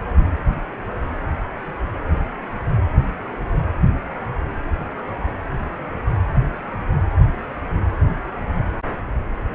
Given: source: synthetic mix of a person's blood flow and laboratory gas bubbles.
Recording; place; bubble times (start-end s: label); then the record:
Doppler ultrasound of blood flow; precordium
no bubbles
From the record:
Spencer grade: 0 (complete lack of bubble signals)